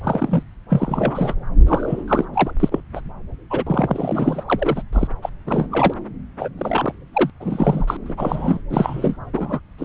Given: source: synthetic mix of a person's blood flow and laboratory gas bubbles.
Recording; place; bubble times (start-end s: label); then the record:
Doppler ultrasound of blood flow; subclavian vein
0.04-0.43 s: bubbles
0.69-1.34 s: bubbles
1.67-2.04 s: bubbles
2.08-2.25 s: bubbles
2.33-2.51 s: bubbles
2.60-2.81 s: bubbles
2.95-3.01 s: bubbles
3.50-3.63 s: bubbles
3.67-4.43 s: bubbles
4.47-4.82 s: bubbles
4.92-5.08 s: bubbles
5.22-5.29 s: bubbles
5.46-5.67 s: bubbles
5.71-5.94 s: bubbles
6.39-6.49 s: bubbles
6.58-6.94 s: bubbles
7.13-7.30 s: bubbles
7.40-7.97 s: bubbles
8.06-8.61 s: bubbles
8.70-9.16 s: bubbles
9.33-9.60 s: bubbles
9.78-9.85 s: bubbles
From the record:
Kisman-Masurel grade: 342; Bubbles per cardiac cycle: rolling drumbeat, 9 or more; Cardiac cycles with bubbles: 100%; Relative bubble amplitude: moderate (0.250 to 0.450); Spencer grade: 3 (all of the cardiac periods contain showers or single bubble signals, but not dominating or overriding the cardiac motion signals); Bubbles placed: anywhere in the cardiac cycle